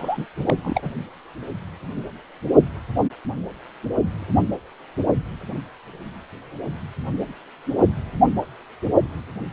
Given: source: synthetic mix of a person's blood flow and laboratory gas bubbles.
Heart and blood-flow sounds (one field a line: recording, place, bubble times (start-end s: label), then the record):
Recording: Doppler ultrasound of blood flow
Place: precordium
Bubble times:
0.00-0.26 s: bubbles
0.45-0.56 s: bubbles
0.64-0.90 s: bubbles
From the record:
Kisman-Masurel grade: 212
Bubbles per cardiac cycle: several, 3 to 8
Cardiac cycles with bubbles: 1 to 10%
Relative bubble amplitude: moderate (0.250 to 0.450)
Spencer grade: 1 (occasional bubble signal discernible with the cardiac motion signal, with majority of cardiac periods free of bubbles)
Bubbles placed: only in the low amplitude regions of the cardiac cycle